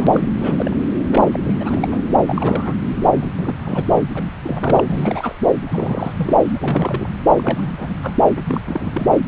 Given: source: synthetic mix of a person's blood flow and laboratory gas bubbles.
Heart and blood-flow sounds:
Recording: Doppler ultrasound of blood flow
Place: subclavian vein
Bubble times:
0.00-0.07 s: bubbles
0.12-0.29 s: bubbles
0.38-0.77 s: bubbles
1.11-1.21 s: bubbles
1.32-1.40 s: bubbles
1.45-1.54 s: bubbles
1.60-2.02 s: bubbles
2.27-2.75 s: bubbles
3.00-3.08 s: bubbles
3.14-3.29 s: bubbles
3.37-3.54 s: bubbles
3.63-3.86 s: bubbles
3.94-4.03 s: bubbles
4.15-4.25 s: bubbles
4.42-5.35 s: bubbles
5.66-6.37 s: bubbles
6.46-7.08 s: bubbles
7.32-8.17 s: bubbles
8.35-8.60 s: bubbles
8.65-8.91 s: bubbles
8.94-9.07 s: bubbles
9.10-9.18 s: bubbles
From the record:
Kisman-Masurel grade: 342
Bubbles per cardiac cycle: rolling drumbeat, 9 or more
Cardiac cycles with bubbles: 100%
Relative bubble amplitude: moderate (0.250 to 0.450)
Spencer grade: 3 (all of the cardiac periods contain showers or single bubble signals, but not dominating or overriding the cardiac motion signals)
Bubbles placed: anywhere in the cardiac cycle

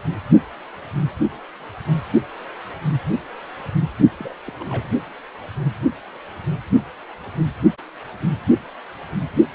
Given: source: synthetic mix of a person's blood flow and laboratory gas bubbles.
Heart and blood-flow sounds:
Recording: Doppler ultrasound of blood flow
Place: precordium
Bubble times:
4.18-4.33 s: bubbles
4.46-4.51 s: bubbles
4.59-4.88 s: bubbles
From the record:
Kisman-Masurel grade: 211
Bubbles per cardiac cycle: several, 3 to 8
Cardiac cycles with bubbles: 1 to 10%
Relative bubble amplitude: barely perceptible (0.100 to 0.250)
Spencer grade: 1 (occasional bubble signal discernible with the cardiac motion signal, with majority of cardiac periods free of bubbles)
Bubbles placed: only in the low amplitude regions of the cardiac cycle

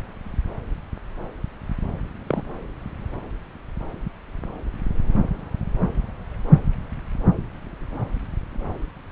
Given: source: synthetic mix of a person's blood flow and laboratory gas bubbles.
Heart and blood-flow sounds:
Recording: Doppler ultrasound of blood flow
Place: subclavian vein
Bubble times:
2.27-2.42 s: bubbles
From the record:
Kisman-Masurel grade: 112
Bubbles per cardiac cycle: 1 to 2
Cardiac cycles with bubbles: 1 to 10%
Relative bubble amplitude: moderate (0.250 to 0.450)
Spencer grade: 1 (occasional bubble signal discernible with the cardiac motion signal, with majority of cardiac periods free of bubbles)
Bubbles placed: anywhere in the cardiac cycle

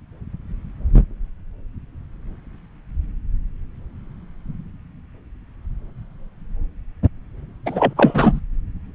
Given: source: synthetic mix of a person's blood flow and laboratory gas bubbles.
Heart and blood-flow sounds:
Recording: Doppler ultrasound of blood flow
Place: subclavian vein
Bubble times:
7.65-7.94 s: bubbles
7.96-8.40 s: bubbles
From the record:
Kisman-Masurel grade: 213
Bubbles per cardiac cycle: several, 3 to 8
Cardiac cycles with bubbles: 1 to 10%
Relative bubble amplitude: loud (0.450 to 0.775)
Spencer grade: 1 (occasional bubble signal discernible with the cardiac motion signal, with majority of cardiac periods free of bubbles)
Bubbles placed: anywhere in the cardiac cycle

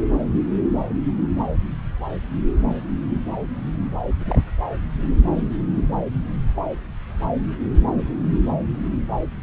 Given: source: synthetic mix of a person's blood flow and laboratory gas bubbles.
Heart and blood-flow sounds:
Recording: Doppler ultrasound of blood flow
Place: subclavian vein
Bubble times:
4.20-4.39 s: bubbles
From the record:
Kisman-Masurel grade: 211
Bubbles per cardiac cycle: several, 3 to 8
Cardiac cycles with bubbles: 1 to 10%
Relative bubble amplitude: barely perceptible (0.100 to 0.250)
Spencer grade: 1 (occasional bubble signal discernible with the cardiac motion signal, with majority of cardiac periods free of bubbles)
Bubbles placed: anywhere in the cardiac cycle

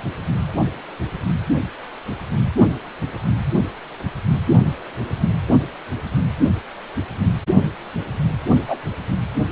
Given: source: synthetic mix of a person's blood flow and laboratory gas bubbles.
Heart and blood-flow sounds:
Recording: Doppler ultrasound of blood flow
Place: precordium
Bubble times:
8.67-8.76 s: bubbles
From the record:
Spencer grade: 1 (occasional bubble signal discernible with the cardiac motion signal, with majority of cardiac periods free of bubbles)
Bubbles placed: only in the low amplitude regions of the cardiac cycle

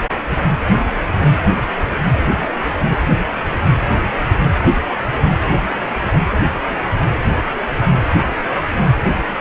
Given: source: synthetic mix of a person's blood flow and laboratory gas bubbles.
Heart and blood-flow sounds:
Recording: Doppler ultrasound of blood flow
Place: precordium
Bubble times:
no bubbles
From the record:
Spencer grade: 0 (complete lack of bubble signals)

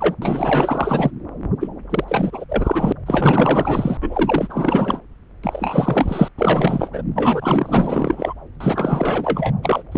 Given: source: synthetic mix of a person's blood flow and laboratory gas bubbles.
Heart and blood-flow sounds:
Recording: Doppler ultrasound of blood flow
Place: subclavian vein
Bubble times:
0.00-0.15 s: bubbles
0.21-1.10 s: bubbles
1.60-1.68 s: bubbles
1.90-2.04 s: bubbles
2.08-2.45 s: bubbles
2.49-2.93 s: bubbles
3.06-3.97 s: bubbles
4.02-5.00 s: bubbles
5.42-6.29 s: bubbles
6.38-6.89 s: bubbles
6.93-7.02 s: bubbles
7.16-8.33 s: bubbles
8.60-9.54 s: bubbles
9.62-9.83 s: bubbles
9.92-9.98 s: bubbles
From the record:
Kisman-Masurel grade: 444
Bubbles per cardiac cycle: continuous sound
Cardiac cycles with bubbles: 100%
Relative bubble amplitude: maximal (0.775 to 0.999)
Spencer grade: 4 (maximum detectable bubble signal sounding continuously throughout systole and diastole of every cardiac period, and overriding the amplitude of the normal cardiac signals)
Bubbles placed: anywhere in the cardiac cycle

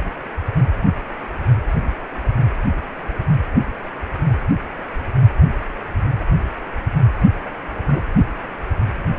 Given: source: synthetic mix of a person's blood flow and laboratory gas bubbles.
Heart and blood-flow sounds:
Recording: Doppler ultrasound of blood flow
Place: precordium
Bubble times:
7.45-7.49 s: bubbles
7.86-8.02 s: bubbles
From the record:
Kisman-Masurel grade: 111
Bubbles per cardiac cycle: 1 to 2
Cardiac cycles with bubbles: 1 to 10%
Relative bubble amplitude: barely perceptible (0.100 to 0.250)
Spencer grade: 1 (occasional bubble signal discernible with the cardiac motion signal, with majority of cardiac periods free of bubbles)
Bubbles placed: anywhere in the cardiac cycle

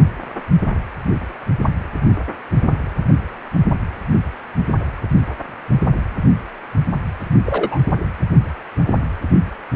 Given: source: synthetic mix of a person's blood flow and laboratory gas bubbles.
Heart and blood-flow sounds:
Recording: Doppler ultrasound of blood flow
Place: precordium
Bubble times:
7.45-7.79 s: bubbles
From the record:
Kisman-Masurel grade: 113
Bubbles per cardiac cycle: 1 to 2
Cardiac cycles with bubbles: 1 to 10%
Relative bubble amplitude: loud (0.450 to 0.775)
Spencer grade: 1 (occasional bubble signal discernible with the cardiac motion signal, with majority of cardiac periods free of bubbles)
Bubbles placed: anywhere in the cardiac cycle

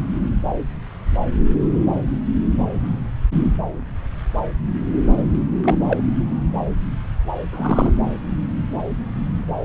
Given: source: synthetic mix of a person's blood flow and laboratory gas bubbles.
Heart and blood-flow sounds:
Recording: Doppler ultrasound of blood flow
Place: subclavian vein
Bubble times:
5.64-5.79 s: bubbles
5.88-6.01 s: bubbles
7.52-7.93 s: bubbles
From the record:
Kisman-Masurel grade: 112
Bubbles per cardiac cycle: 1 to 2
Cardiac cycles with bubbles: 1 to 10%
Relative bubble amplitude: moderate (0.250 to 0.450)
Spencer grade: 1 (occasional bubble signal discernible with the cardiac motion signal, with majority of cardiac periods free of bubbles)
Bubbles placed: anywhere in the cardiac cycle

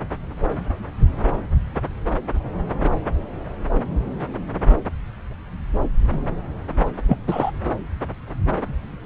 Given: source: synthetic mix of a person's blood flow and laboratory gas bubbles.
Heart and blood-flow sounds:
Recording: Doppler ultrasound of blood flow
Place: subclavian vein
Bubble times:
7.08-7.17 s: bubbles
7.28-7.51 s: bubbles
From the record:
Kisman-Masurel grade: 213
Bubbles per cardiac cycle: several, 3 to 8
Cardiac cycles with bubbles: 1 to 10%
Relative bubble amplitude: loud (0.450 to 0.775)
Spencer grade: 1 (occasional bubble signal discernible with the cardiac motion signal, with majority of cardiac periods free of bubbles)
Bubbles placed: anywhere in the cardiac cycle

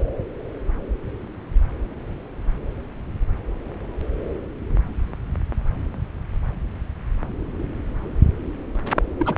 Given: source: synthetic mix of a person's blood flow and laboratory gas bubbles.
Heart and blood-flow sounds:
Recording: Doppler ultrasound of blood flow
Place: subclavian vein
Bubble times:
9.19-9.35 s: bubbles
From the record:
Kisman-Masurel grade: 112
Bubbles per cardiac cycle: 1 to 2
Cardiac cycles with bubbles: 1 to 10%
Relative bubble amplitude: moderate (0.250 to 0.450)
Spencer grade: 1 (occasional bubble signal discernible with the cardiac motion signal, with majority of cardiac periods free of bubbles)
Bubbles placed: anywhere in the cardiac cycle

